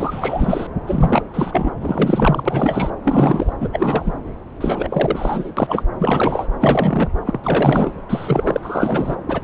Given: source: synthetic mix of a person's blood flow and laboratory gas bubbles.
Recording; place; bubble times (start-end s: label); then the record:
Doppler ultrasound of blood flow; subclavian vein
0.00-0.67 s: bubbles
0.86-1.23 s: bubbles
1.33-1.70 s: bubbles
1.80-2.90 s: bubbles
3.04-3.53 s: bubbles
3.60-3.69 s: bubbles
3.73-4.13 s: bubbles
4.61-5.51 s: bubbles
5.57-5.83 s: bubbles
6.00-6.47 s: bubbles
6.61-7.11 s: bubbles
7.25-7.39 s: bubbles
7.43-7.92 s: bubbles
8.09-9.16 s: bubbles
9.28-9.44 s: bubbles
From the record:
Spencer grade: 3 (all of the cardiac periods contain showers or single bubble signals, but not dominating or overriding the cardiac motion signals); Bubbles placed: anywhere in the cardiac cycle